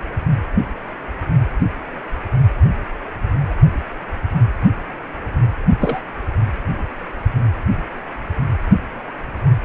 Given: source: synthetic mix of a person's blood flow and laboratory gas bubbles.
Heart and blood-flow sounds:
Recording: Doppler ultrasound of blood flow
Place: precordium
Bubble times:
5.80-6.03 s: bubbles
From the record:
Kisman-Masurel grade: 122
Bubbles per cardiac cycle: 1 to 2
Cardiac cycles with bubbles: 10 to 50%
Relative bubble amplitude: moderate (0.250 to 0.450)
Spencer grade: 2 (many but less than half of the cardiac periods contain bubble signals, singularly or in groups)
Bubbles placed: anywhere in the cardiac cycle

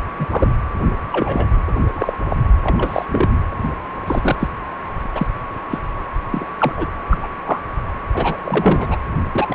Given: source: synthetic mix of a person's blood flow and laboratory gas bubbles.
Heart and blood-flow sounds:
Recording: Doppler ultrasound of blood flow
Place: precordium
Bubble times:
0.18-0.26 s: bubbles
0.29-0.54 s: bubbles
1.12-1.49 s: bubbles
1.68-1.73 s: bubbles
1.94-2.13 s: bubbles
2.30-2.37 s: bubbles
2.63-3.06 s: bubbles
3.10-3.39 s: bubbles
4.06-4.36 s: bubbles
4.39-4.48 s: bubbles
5.14-5.27 s: bubbles
5.71-5.78 s: bubbles
6.31-6.45 s: bubbles
6.57-6.87 s: bubbles
7.10-7.19 s: bubbles
7.22-7.28 s: bubbles
7.45-7.60 s: bubbles
8.12-8.38 s: bubbles
8.44-8.97 s: bubbles
9.32-9.55 s: bubbles
From the record:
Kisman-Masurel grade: 243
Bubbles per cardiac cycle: several, 3 to 8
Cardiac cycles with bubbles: 100%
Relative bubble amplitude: loud (0.450 to 0.775)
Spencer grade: 3 (all of the cardiac periods contain showers or single bubble signals, but not dominating or overriding the cardiac motion signals)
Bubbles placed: anywhere in the cardiac cycle

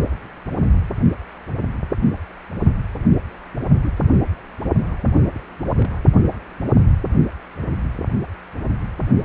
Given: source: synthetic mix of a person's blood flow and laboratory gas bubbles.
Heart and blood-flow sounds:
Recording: Doppler ultrasound of blood flow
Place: precordium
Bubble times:
3.83-3.92 s: bubbles
5.33-5.39 s: bubbles
5.63-5.72 s: bubbles
5.75-5.96 s: bubbles
From the record:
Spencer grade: 2 (many but less than half of the cardiac periods contain bubble signals, singularly or in groups)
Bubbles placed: only in the low amplitude regions of the cardiac cycle

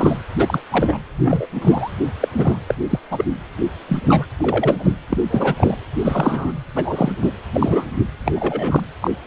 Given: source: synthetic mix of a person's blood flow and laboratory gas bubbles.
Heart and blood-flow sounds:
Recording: Doppler ultrasound of blood flow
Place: precordium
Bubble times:
0.00-0.18 s: bubbles
0.38-0.61 s: bubbles
0.70-0.99 s: bubbles
1.18-1.47 s: bubbles
1.54-1.90 s: bubbles
2.20-2.28 s: bubbles
2.37-2.56 s: bubbles
2.67-2.75 s: bubbles
2.90-2.99 s: bubbles
3.10-3.25 s: bubbles
3.89-4.26 s: bubbles
4.37-4.93 s: bubbles
5.09-5.17 s: bubbles
5.30-5.54 s: bubbles
5.57-5.76 s: bubbles
5.99-6.53 s: bubbles
6.75-7.12 s: bubbles
7.21-7.30 s: bubbles
7.53-7.84 s: bubbles
8.25-8.80 s: bubbles
9.01-9.11 s: bubbles
From the record:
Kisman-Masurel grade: 243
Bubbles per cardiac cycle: several, 3 to 8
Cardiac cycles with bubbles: 100%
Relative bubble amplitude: loud (0.450 to 0.775)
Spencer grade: 3 (all of the cardiac periods contain showers or single bubble signals, but not dominating or overriding the cardiac motion signals)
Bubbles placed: anywhere in the cardiac cycle

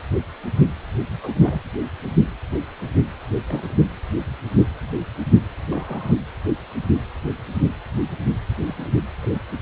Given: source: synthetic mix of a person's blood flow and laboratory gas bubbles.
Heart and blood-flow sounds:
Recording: Doppler ultrasound of blood flow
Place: precordium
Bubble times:
1.07-1.61 s: bubbles
3.46-3.74 s: bubbles
5.67-6.13 s: bubbles
8.66-8.75 s: bubbles
8.78-8.88 s: bubbles
9.22-9.39 s: bubbles
From the record:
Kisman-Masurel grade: 121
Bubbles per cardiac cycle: 1 to 2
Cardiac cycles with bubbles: 10 to 50%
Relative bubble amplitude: barely perceptible (0.100 to 0.250)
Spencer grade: 2 (many but less than half of the cardiac periods contain bubble signals, singularly or in groups)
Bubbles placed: anywhere in the cardiac cycle

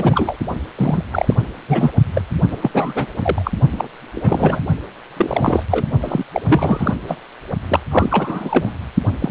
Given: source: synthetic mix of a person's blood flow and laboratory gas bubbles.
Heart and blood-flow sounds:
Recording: Doppler ultrasound of blood flow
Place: precordium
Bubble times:
0.00-0.36 s: bubbles
0.78-1.04 s: bubbles
1.11-1.34 s: bubbles
1.68-1.92 s: bubbles
2.14-2.21 s: bubbles
2.50-2.58 s: bubbles
2.62-2.71 s: bubbles
2.74-3.06 s: bubbles
3.22-3.51 s: bubbles
3.72-3.88 s: bubbles
4.15-4.60 s: bubbles
5.17-5.63 s: bubbles
5.71-5.86 s: bubbles
6.01-6.24 s: bubbles
6.32-6.42 s: bubbles
6.47-6.95 s: bubbles
7.07-7.16 s: bubbles
7.69-7.80 s: bubbles
7.91-8.71 s: bubbles
9.21-9.31 s: bubbles
From the record:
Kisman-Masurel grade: 342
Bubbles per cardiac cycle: rolling drumbeat, 9 or more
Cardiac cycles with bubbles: 100%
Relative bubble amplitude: moderate (0.250 to 0.450)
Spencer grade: 3 (all of the cardiac periods contain showers or single bubble signals, but not dominating or overriding the cardiac motion signals)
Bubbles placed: only in the low amplitude regions of the cardiac cycle

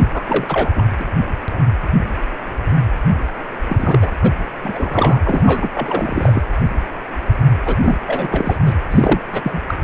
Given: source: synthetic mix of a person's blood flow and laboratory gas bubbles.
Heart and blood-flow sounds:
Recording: Doppler ultrasound of blood flow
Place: precordium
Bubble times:
0.13-0.23 s: bubbles
0.28-0.70 s: bubbles
0.76-0.85 s: bubbles
0.99-1.04 s: bubbles
3.69-4.12 s: bubbles
4.22-4.32 s: bubbles
4.64-5.19 s: bubbles
5.25-5.69 s: bubbles
5.74-6.43 s: bubbles
7.65-7.77 s: bubbles
7.83-7.98 s: bubbles
8.06-8.57 s: bubbles
8.66-8.74 s: bubbles
8.90-9.20 s: bubbles
9.33-9.61 s: bubbles
9.68-9.75 s: bubbles
From the record:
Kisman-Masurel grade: 332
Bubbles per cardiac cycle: rolling drumbeat, 9 or more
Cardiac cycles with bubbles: 50 to 99%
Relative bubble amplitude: moderate (0.250 to 0.450)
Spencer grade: 3 (all of the cardiac periods contain showers or single bubble signals, but not dominating or overriding the cardiac motion signals)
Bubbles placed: anywhere in the cardiac cycle

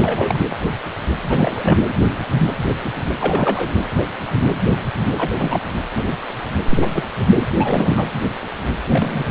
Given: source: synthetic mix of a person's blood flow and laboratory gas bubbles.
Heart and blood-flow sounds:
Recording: Doppler ultrasound of blood flow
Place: precordium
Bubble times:
0.00-0.39 s: bubbles
1.21-1.78 s: bubbles
3.19-3.71 s: bubbles
5.17-5.31 s: bubbles
5.39-5.61 s: bubbles
6.70-6.87 s: bubbles
6.90-7.04 s: bubbles
7.31-7.44 s: bubbles
7.60-8.05 s: bubbles
8.89-9.25 s: bubbles
From the record:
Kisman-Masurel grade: 222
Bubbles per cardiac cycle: several, 3 to 8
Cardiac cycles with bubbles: 10 to 50%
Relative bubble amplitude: moderate (0.250 to 0.450)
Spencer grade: 2 (many but less than half of the cardiac periods contain bubble signals, singularly or in groups)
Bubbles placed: anywhere in the cardiac cycle

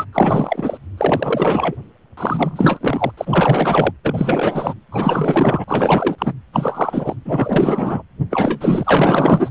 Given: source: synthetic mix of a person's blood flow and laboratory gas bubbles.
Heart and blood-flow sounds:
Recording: Doppler ultrasound of blood flow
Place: precordium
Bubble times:
0.00-0.05 s: bubbles
0.12-0.78 s: bubbles
0.97-1.75 s: bubbles
2.17-3.12 s: bubbles
3.17-3.92 s: bubbles
4.03-4.74 s: bubbles
4.91-5.64 s: bubbles
5.67-6.33 s: bubbles
6.53-7.15 s: bubbles
7.25-8.03 s: bubbles
8.30-9.50 s: bubbles
From the record:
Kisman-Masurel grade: 444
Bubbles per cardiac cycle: continuous sound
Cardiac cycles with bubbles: 100%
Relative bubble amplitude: maximal (0.775 to 0.999)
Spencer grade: 4 (maximum detectable bubble signal sounding continuously throughout systole and diastole of every cardiac period, and overriding the amplitude of the normal cardiac signals)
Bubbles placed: anywhere in the cardiac cycle

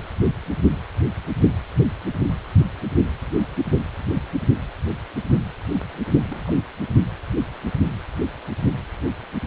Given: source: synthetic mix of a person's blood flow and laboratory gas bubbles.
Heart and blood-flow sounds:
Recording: Doppler ultrasound of blood flow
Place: precordium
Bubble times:
6.30-6.54 s: bubbles
From the record:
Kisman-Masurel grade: 211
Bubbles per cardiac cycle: several, 3 to 8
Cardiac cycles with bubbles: 1 to 10%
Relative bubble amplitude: barely perceptible (0.100 to 0.250)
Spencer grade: 1 (occasional bubble signal discernible with the cardiac motion signal, with majority of cardiac periods free of bubbles)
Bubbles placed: only in the low amplitude regions of the cardiac cycle

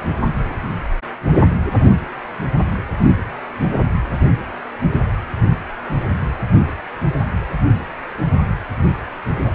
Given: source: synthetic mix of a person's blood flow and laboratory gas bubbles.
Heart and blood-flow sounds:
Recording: Doppler ultrasound of blood flow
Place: precordium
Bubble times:
no bubbles
From the record:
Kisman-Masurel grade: 000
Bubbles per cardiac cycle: 0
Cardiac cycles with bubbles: 0%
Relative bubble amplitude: no bubbles discernible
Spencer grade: 0 (complete lack of bubble signals)

